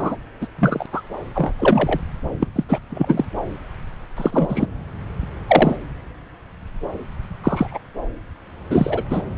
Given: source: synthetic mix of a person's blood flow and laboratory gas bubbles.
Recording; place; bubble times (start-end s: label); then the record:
Doppler ultrasound of blood flow; subclavian vein
0.00-0.15 s: bubbles
0.41-0.47 s: bubbles
0.58-0.86 s: bubbles
0.93-1.02 s: bubbles
1.34-1.52 s: bubbles
1.58-2.00 s: bubbles
2.40-2.47 s: bubbles
2.55-2.64 s: bubbles
2.69-2.79 s: bubbles
2.90-3.25 s: bubbles
4.17-4.66 s: bubbles
5.47-5.76 s: bubbles
7.43-7.78 s: bubbles
8.70-9.04 s: bubbles
9.10-9.21 s: bubbles
From the record:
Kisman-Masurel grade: 233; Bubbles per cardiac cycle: several, 3 to 8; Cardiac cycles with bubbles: 50 to 99%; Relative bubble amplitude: loud (0.450 to 0.775); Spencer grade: 3 (all of the cardiac periods contain showers or single bubble signals, but not dominating or overriding the cardiac motion signals); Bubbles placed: anywhere in the cardiac cycle